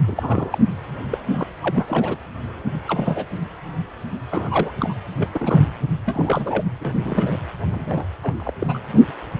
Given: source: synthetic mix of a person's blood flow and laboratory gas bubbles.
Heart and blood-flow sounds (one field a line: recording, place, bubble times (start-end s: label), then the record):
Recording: Doppler ultrasound of blood flow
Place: precordium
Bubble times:
0.07-0.58 s: bubbles
1.11-1.18 s: bubbles
1.31-1.46 s: bubbles
1.62-2.17 s: bubbles
2.88-3.25 s: bubbles
4.30-4.71 s: bubbles
4.80-4.94 s: bubbles
5.18-5.29 s: bubbles
5.33-5.66 s: bubbles
6.05-6.63 s: bubbles
6.80-6.96 s: bubbles
7.04-7.38 s: bubbles
7.71-8.06 s: bubbles
8.22-8.33 s: bubbles
8.36-8.50 s: bubbles
8.59-8.82 s: bubbles
8.92-9.02 s: bubbles
From the record:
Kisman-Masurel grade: 232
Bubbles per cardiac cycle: several, 3 to 8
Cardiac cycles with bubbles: 50 to 99%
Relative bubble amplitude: moderate (0.250 to 0.450)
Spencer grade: 3 (all of the cardiac periods contain showers or single bubble signals, but not dominating or overriding the cardiac motion signals)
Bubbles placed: anywhere in the cardiac cycle